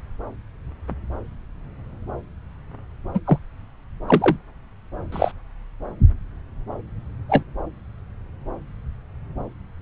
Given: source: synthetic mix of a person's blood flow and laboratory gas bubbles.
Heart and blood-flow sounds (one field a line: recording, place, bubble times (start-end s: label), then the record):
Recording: Doppler ultrasound of blood flow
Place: subclavian vein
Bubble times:
3.13-3.20 s: bubbles
3.25-3.38 s: bubbles
4.08-4.37 s: bubbles
5.12-5.31 s: bubbles
7.29-7.43 s: bubbles
From the record:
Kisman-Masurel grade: 123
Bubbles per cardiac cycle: 1 to 2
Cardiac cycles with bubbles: 10 to 50%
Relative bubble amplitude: loud (0.450 to 0.775)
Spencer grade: 2 (many but less than half of the cardiac periods contain bubble signals, singularly or in groups)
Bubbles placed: anywhere in the cardiac cycle